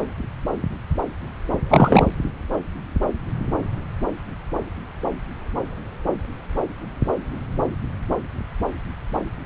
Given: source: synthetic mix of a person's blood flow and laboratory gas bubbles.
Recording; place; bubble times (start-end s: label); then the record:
Doppler ultrasound of blood flow; subclavian vein
1.69-2.08 s: bubbles
From the record:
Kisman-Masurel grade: 213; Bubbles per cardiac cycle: several, 3 to 8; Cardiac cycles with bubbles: 1 to 10%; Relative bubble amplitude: loud (0.450 to 0.775); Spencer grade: 1 (occasional bubble signal discernible with the cardiac motion signal, with majority of cardiac periods free of bubbles); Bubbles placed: anywhere in the cardiac cycle